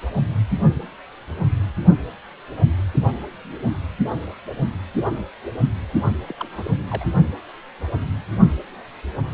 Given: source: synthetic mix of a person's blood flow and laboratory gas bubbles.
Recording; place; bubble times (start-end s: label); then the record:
Doppler ultrasound of blood flow; precordium
6.27-6.34 s: bubbles
6.39-6.77 s: bubbles
6.88-7.07 s: bubbles
From the record:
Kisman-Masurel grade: 221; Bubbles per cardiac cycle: several, 3 to 8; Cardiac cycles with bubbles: 10 to 50%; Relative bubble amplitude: barely perceptible (0.100 to 0.250); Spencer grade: 2 (many but less than half of the cardiac periods contain bubble signals, singularly or in groups); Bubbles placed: only in the low amplitude regions of the cardiac cycle